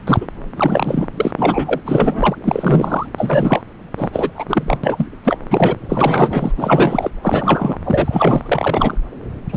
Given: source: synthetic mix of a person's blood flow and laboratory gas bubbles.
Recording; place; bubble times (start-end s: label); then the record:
Doppler ultrasound of blood flow; subclavian vein
0.06-0.27 s: bubbles
0.55-1.07 s: bubbles
1.16-1.31 s: bubbles
1.37-1.80 s: bubbles
1.86-2.35 s: bubbles
2.44-3.06 s: bubbles
3.17-3.61 s: bubbles
3.97-4.31 s: bubbles
4.35-4.79 s: bubbles
4.83-5.07 s: bubbles
5.24-5.37 s: bubbles
5.50-5.77 s: bubbles
5.89-6.52 s: bubbles
6.58-7.12 s: bubbles
7.23-7.77 s: bubbles
7.84-8.41 s: bubbles
8.46-8.97 s: bubbles
9.48-9.57 s: bubbles
From the record:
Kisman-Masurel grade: 343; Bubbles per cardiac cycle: rolling drumbeat, 9 or more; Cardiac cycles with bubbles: 100%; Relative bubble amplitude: loud (0.450 to 0.775); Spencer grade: 3 (all of the cardiac periods contain showers or single bubble signals, but not dominating or overriding the cardiac motion signals); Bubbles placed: anywhere in the cardiac cycle